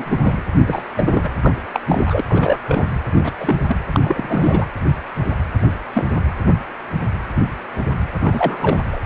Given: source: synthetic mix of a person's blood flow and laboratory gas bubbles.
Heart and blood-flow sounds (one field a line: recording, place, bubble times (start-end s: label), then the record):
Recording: Doppler ultrasound of blood flow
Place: precordium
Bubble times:
0.00-0.35 s: bubbles
0.66-0.81 s: bubbles
0.97-1.04 s: bubbles
1.06-1.30 s: bubbles
1.42-1.54 s: bubbles
1.73-1.80 s: bubbles
1.88-2.23 s: bubbles
2.29-2.58 s: bubbles
2.66-2.86 s: bubbles
3.12-3.32 s: bubbles
3.38-3.56 s: bubbles
3.68-3.76 s: bubbles
3.92-4.67 s: bubbles
5.93-6.04 s: bubbles
6.16-6.20 s: bubbles
8.23-8.81 s: bubbles
8.92-9.00 s: bubbles
From the record:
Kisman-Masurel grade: 232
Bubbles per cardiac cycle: several, 3 to 8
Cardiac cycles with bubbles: 50 to 99%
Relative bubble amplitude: moderate (0.250 to 0.450)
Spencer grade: 3 (all of the cardiac periods contain showers or single bubble signals, but not dominating or overriding the cardiac motion signals)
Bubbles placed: anywhere in the cardiac cycle